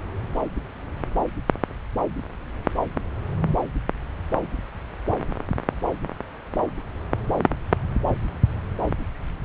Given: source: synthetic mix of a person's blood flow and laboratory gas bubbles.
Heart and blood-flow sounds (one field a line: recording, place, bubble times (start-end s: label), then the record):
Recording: Doppler ultrasound of blood flow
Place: subclavian vein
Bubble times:
no bubbles
From the record:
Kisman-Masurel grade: 000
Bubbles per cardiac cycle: 0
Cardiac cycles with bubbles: 0%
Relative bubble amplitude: no bubbles discernible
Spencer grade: 0 (complete lack of bubble signals)